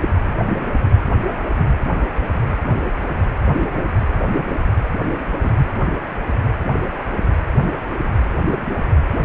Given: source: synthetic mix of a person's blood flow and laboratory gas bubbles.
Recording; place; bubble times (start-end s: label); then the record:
Doppler ultrasound of blood flow; precordium
5.43-5.52 s: bubbles
From the record:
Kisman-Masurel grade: 112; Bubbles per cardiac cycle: 1 to 2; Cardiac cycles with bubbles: 1 to 10%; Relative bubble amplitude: moderate (0.250 to 0.450); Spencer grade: 1 (occasional bubble signal discernible with the cardiac motion signal, with majority of cardiac periods free of bubbles); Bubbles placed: anywhere in the cardiac cycle